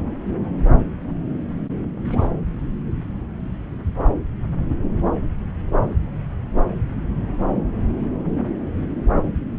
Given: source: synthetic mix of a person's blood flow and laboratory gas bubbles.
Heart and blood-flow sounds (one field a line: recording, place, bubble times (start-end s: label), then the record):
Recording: Doppler ultrasound of blood flow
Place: subclavian vein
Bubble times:
2.10-2.29 s: bubbles
From the record:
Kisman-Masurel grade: 121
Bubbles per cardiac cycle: 1 to 2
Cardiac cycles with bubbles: 10 to 50%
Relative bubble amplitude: barely perceptible (0.100 to 0.250)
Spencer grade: 2 (many but less than half of the cardiac periods contain bubble signals, singularly or in groups)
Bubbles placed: anywhere in the cardiac cycle